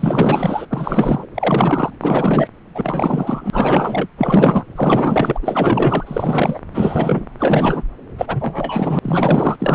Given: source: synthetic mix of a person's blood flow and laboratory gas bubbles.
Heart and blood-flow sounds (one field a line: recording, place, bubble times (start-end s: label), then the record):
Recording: Doppler ultrasound of blood flow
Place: subclavian vein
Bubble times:
0.00-0.67 s: bubbles
0.69-1.28 s: bubbles
1.35-1.90 s: bubbles
2.00-2.48 s: bubbles
2.75-4.07 s: bubbles
4.17-4.64 s: bubbles
4.75-5.39 s: bubbles
5.42-6.59 s: bubbles
6.71-7.26 s: bubbles
7.38-7.83 s: bubbles
8.18-8.99 s: bubbles
9.02-9.56 s: bubbles
9.59-9.75 s: bubbles
From the record:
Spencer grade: 4 (maximum detectable bubble signal sounding continuously throughout systole and diastole of every cardiac period, and overriding the amplitude of the normal cardiac signals)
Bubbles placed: anywhere in the cardiac cycle